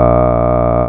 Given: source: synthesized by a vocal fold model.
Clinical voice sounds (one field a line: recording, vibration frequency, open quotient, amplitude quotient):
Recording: sustained vowel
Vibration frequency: 60 Hz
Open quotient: 0.4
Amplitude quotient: 1.2